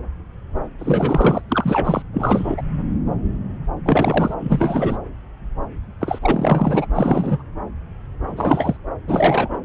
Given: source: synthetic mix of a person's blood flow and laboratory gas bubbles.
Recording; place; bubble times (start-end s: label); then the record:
Doppler ultrasound of blood flow; subclavian vein
0.78-1.42 s: bubbles
1.48-2.02 s: bubbles
2.13-2.62 s: bubbles
3.85-4.35 s: bubbles
4.40-4.97 s: bubbles
6.01-6.19 s: bubbles
6.22-6.87 s: bubbles
6.95-7.43 s: bubbles
8.26-8.77 s: bubbles
9.08-9.60 s: bubbles
From the record:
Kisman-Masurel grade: 333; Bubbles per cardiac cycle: rolling drumbeat, 9 or more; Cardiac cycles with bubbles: 50 to 99%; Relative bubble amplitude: loud (0.450 to 0.775); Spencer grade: 3 (all of the cardiac periods contain showers or single bubble signals, but not dominating or overriding the cardiac motion signals); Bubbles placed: anywhere in the cardiac cycle